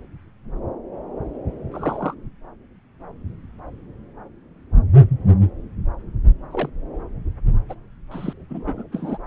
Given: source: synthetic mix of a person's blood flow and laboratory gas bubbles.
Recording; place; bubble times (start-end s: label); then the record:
Doppler ultrasound of blood flow; subclavian vein
1.71-2.14 s: bubbles
6.52-6.70 s: bubbles
7.70-7.75 s: bubbles
8.11-8.33 s: bubbles
8.49-8.84 s: bubbles
8.92-9.18 s: bubbles
From the record:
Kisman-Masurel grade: 121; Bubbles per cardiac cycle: 1 to 2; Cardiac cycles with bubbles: 10 to 50%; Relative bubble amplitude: barely perceptible (0.100 to 0.250); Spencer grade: 2 (many but less than half of the cardiac periods contain bubble signals, singularly or in groups); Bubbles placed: anywhere in the cardiac cycle